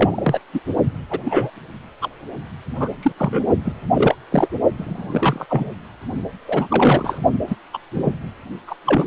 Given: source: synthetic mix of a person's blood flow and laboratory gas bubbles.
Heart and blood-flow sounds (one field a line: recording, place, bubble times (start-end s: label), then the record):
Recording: Doppler ultrasound of blood flow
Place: precordium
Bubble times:
0.00-0.39 s: bubbles
0.53-0.60 s: bubbles
1.10-1.20 s: bubbles
1.24-1.51 s: bubbles
2.01-2.09 s: bubbles
2.78-2.88 s: bubbles
3.02-3.12 s: bubbles
3.17-3.47 s: bubbles
3.64-3.73 s: bubbles
3.94-4.15 s: bubbles
4.31-4.48 s: bubbles
4.77-5.46 s: bubbles
5.48-5.71 s: bubbles
6.47-7.19 s: bubbles
7.47-7.56 s: bubbles
7.73-7.79 s: bubbles
7.93-8.11 s: bubbles
8.67-8.75 s: bubbles
8.86-9.07 s: bubbles
From the record:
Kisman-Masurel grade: 243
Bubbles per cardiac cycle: several, 3 to 8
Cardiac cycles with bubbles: 100%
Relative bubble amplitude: loud (0.450 to 0.775)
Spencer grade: 3 (all of the cardiac periods contain showers or single bubble signals, but not dominating or overriding the cardiac motion signals)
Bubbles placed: only in the low amplitude regions of the cardiac cycle